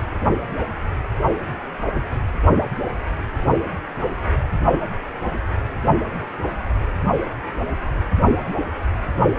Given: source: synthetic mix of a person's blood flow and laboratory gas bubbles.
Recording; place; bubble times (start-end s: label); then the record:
Doppler ultrasound of blood flow; precordium
no bubbles
From the record:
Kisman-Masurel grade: 000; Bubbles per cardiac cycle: 0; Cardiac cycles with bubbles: 0%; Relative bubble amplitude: no bubbles discernible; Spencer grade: 0 (complete lack of bubble signals)